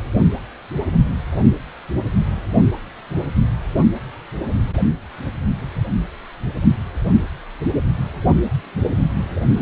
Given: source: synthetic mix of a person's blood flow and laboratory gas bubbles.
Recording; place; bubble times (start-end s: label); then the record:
Doppler ultrasound of blood flow; precordium
no bubbles
From the record:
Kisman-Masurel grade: 000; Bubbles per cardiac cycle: 0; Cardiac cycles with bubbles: 0%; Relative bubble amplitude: no bubbles discernible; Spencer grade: 0 (complete lack of bubble signals)